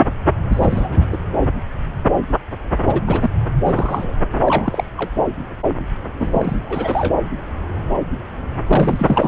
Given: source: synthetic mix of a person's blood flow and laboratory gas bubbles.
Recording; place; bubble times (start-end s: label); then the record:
Doppler ultrasound of blood flow; subclavian vein
0.53-1.06 s: bubbles
1.12-1.17 s: bubbles
2.85-3.01 s: bubbles
3.07-3.30 s: bubbles
3.66-4.14 s: bubbles
4.46-4.84 s: bubbles
4.97-5.10 s: bubbles
6.18-6.56 s: bubbles
6.66-7.18 s: bubbles
8.66-9.28 s: bubbles
From the record:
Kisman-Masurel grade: 222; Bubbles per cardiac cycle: several, 3 to 8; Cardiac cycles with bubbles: 10 to 50%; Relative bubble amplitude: moderate (0.250 to 0.450); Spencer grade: 2 (many but less than half of the cardiac periods contain bubble signals, singularly or in groups); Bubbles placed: anywhere in the cardiac cycle